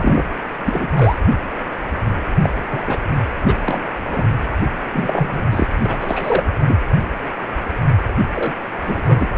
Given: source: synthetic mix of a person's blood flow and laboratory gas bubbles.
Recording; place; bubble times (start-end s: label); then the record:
Doppler ultrasound of blood flow; precordium
0.00-0.25 s: bubbles
0.66-1.18 s: bubbles
2.40-2.53 s: bubbles
2.68-2.97 s: bubbles
3.44-3.55 s: bubbles
3.66-3.91 s: bubbles
4.08-4.22 s: bubbles
4.92-5.42 s: bubbles
5.50-5.66 s: bubbles
5.84-5.97 s: bubbles
6.00-6.52 s: bubbles
6.67-6.78 s: bubbles
8.34-8.53 s: bubbles
8.84-9.02 s: bubbles
9.05-9.28 s: bubbles
9.35-9.38 s: bubbles
From the record:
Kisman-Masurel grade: 233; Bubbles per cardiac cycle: several, 3 to 8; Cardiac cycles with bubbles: 50 to 99%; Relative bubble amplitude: loud (0.450 to 0.775); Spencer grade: 3 (all of the cardiac periods contain showers or single bubble signals, but not dominating or overriding the cardiac motion signals); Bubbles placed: anywhere in the cardiac cycle